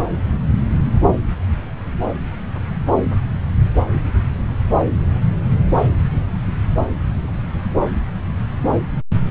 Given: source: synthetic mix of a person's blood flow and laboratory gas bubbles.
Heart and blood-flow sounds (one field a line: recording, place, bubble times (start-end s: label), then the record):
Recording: Doppler ultrasound of blood flow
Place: subclavian vein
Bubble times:
no bubbles
From the record:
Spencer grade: 0 (complete lack of bubble signals)